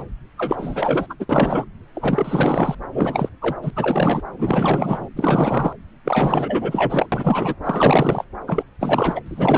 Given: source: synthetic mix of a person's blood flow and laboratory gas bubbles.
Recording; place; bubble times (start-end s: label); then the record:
Doppler ultrasound of blood flow; subclavian vein
0.37-1.07 s: bubbles
1.10-1.15 s: bubbles
1.19-1.25 s: bubbles
1.29-1.65 s: bubbles
1.94-2.75 s: bubbles
2.92-3.29 s: bubbles
3.41-3.55 s: bubbles
3.61-3.70 s: bubbles
3.76-4.22 s: bubbles
4.39-5.08 s: bubbles
5.16-5.73 s: bubbles
6.04-7.06 s: bubbles
7.12-7.55 s: bubbles
7.64-8.24 s: bubbles
8.46-8.63 s: bubbles
8.80-9.21 s: bubbles
9.26-9.58 s: bubbles
From the record:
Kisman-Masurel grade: 444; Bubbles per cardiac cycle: continuous sound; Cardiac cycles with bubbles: 100%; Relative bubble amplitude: maximal (0.775 to 0.999); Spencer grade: 4 (maximum detectable bubble signal sounding continuously throughout systole and diastole of every cardiac period, and overriding the amplitude of the normal cardiac signals); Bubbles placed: anywhere in the cardiac cycle